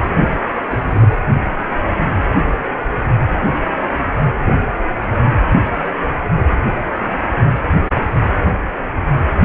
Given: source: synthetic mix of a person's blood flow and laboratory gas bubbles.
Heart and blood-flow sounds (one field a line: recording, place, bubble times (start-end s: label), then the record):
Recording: Doppler ultrasound of blood flow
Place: precordium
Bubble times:
0.69-1.17 s: bubbles
4.45-4.59 s: bubbles
From the record:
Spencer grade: 2 (many but less than half of the cardiac periods contain bubble signals, singularly or in groups)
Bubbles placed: anywhere in the cardiac cycle